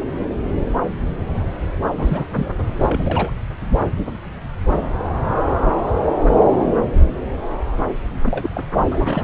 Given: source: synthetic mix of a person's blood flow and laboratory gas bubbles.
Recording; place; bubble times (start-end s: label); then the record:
Doppler ultrasound of blood flow; subclavian vein
1.96-2.24 s: bubbles
2.30-2.52 s: bubbles
2.79-3.31 s: bubbles
8.26-8.50 s: bubbles
8.53-8.61 s: bubbles
8.87-9.24 s: bubbles
From the record:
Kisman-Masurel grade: 222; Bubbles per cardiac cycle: several, 3 to 8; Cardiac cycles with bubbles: 10 to 50%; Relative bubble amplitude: moderate (0.250 to 0.450); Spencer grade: 2 (many but less than half of the cardiac periods contain bubble signals, singularly or in groups); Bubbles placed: anywhere in the cardiac cycle